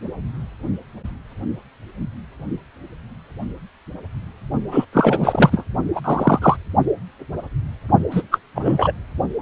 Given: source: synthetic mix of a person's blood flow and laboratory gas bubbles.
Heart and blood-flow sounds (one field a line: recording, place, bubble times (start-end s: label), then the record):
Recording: Doppler ultrasound of blood flow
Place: precordium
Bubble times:
4.71-4.85 s: bubbles
4.92-5.65 s: bubbles
5.95-6.00 s: bubbles
6.04-6.57 s: bubbles
8.11-8.22 s: bubbles
8.31-8.38 s: bubbles
8.54-8.93 s: bubbles
From the record:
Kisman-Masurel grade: 223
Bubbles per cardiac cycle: several, 3 to 8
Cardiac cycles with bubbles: 10 to 50%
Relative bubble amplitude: loud (0.450 to 0.775)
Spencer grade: 2 (many but less than half of the cardiac periods contain bubble signals, singularly or in groups)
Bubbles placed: only in the low amplitude regions of the cardiac cycle